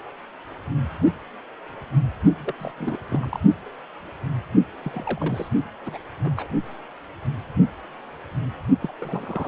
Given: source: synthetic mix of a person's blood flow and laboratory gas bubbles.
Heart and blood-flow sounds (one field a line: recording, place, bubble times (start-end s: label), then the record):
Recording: Doppler ultrasound of blood flow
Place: precordium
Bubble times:
2.38-2.54 s: bubbles
2.59-2.73 s: bubbles
2.77-2.98 s: bubbles
3.10-3.40 s: bubbles
4.82-5.49 s: bubbles
5.86-5.97 s: bubbles
6.24-6.47 s: bubbles
8.81-8.92 s: bubbles
8.99-9.48 s: bubbles
From the record:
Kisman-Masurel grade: 221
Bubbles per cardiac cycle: several, 3 to 8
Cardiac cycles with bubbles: 10 to 50%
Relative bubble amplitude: barely perceptible (0.100 to 0.250)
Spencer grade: 2 (many but less than half of the cardiac periods contain bubble signals, singularly or in groups)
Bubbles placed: only in the low amplitude regions of the cardiac cycle